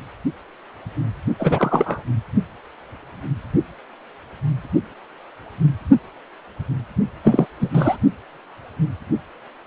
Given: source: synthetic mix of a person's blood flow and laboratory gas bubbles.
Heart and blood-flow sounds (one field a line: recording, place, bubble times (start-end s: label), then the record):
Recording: Doppler ultrasound of blood flow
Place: precordium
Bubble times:
1.39-2.03 s: bubbles
7.23-7.46 s: bubbles
7.59-7.97 s: bubbles
From the record:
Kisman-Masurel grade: 223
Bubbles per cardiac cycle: several, 3 to 8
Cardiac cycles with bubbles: 10 to 50%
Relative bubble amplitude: loud (0.450 to 0.775)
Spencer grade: 2 (many but less than half of the cardiac periods contain bubble signals, singularly or in groups)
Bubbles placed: only in the low amplitude regions of the cardiac cycle